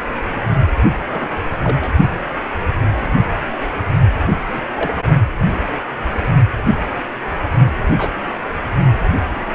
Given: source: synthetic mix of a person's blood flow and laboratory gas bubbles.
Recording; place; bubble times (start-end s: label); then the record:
Doppler ultrasound of blood flow; precordium
1.12-1.39 s: bubbles
1.64-1.91 s: bubbles
4.50-4.91 s: bubbles
7.97-8.10 s: bubbles
From the record:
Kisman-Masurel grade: 122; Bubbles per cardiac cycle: 1 to 2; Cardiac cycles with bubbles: 10 to 50%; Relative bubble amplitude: moderate (0.250 to 0.450); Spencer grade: 2 (many but less than half of the cardiac periods contain bubble signals, singularly or in groups); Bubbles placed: only in the low amplitude regions of the cardiac cycle